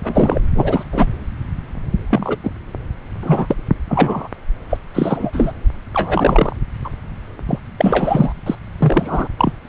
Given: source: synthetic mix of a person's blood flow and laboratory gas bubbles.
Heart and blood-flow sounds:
Doppler ultrasound of blood flow; subclavian vein
0.03-0.40 s: bubbles
0.55-0.83 s: bubbles
0.92-1.07 s: bubbles
2.10-2.37 s: bubbles
2.43-2.50 s: bubbles
3.21-3.56 s: bubbles
3.88-4.28 s: bubbles
4.69-4.77 s: bubbles
4.95-5.52 s: bubbles
5.93-6.56 s: bubbles
6.84-6.89 s: bubbles
7.49-7.59 s: bubbles
7.77-8.32 s: bubbles
8.46-8.55 s: bubbles
8.79-9.28 s: bubbles
9.38-9.53 s: bubbles
9.67-9.69 s: bubbles
From the record:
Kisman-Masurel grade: 243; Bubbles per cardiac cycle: several, 3 to 8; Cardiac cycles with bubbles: 100%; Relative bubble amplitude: loud (0.450 to 0.775); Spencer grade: 3 (all of the cardiac periods contain showers or single bubble signals, but not dominating or overriding the cardiac motion signals); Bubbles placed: anywhere in the cardiac cycle

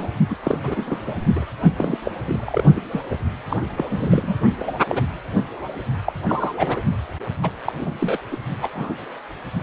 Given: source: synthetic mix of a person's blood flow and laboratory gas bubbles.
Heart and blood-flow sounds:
Doppler ultrasound of blood flow; precordium
0.00-0.08 s: bubbles
0.29-0.35 s: bubbles
0.43-0.57 s: bubbles
0.63-1.00 s: bubbles
1.05-1.15 s: bubbles
1.35-1.45 s: bubbles
1.64-1.69 s: bubbles
1.76-1.98 s: bubbles
2.04-2.11 s: bubbles
2.26-2.64 s: bubbles
2.75-2.83 s: bubbles
2.91-3.00 s: bubbles
3.10-3.16 s: bubbles
3.50-3.57 s: bubbles
3.76-3.85 s: bubbles
3.90-4.33 s: bubbles
4.60-4.63 s: bubbles
4.67-4.71 s: bubbles
4.88-5.02 s: bubbles
6.06-6.12 s: bubbles
6.28-6.54 s: bubbles
6.58-6.81 s: bubbles
7.42-7.50 s: bubbles
7.65-7.73 s: bubbles
7.80-8.19 s: bubbles
8.31-8.38 s: bubbles
8.62-8.69 s: bubbles
8.75-8.94 s: bubbles
From the record:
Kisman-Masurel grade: 242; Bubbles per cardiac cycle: several, 3 to 8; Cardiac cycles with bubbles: 100%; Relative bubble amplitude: moderate (0.250 to 0.450); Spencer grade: 3 (all of the cardiac periods contain showers or single bubble signals, but not dominating or overriding the cardiac motion signals); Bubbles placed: only in the low amplitude regions of the cardiac cycle

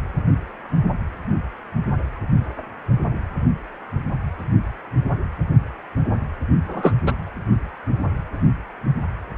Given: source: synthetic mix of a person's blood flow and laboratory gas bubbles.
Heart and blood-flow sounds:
Doppler ultrasound of blood flow; precordium
6.67-6.92 s: bubbles
7.06-7.14 s: bubbles
From the record:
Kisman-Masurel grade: 223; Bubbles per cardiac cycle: several, 3 to 8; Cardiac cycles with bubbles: 10 to 50%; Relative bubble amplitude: loud (0.450 to 0.775); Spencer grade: 2 (many but less than half of the cardiac periods contain bubble signals, singularly or in groups); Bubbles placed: anywhere in the cardiac cycle

